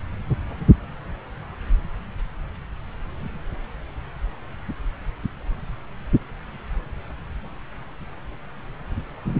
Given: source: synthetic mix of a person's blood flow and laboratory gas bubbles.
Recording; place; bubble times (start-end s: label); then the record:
Doppler ultrasound of blood flow; subclavian vein
no bubbles
From the record:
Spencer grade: 0 (complete lack of bubble signals)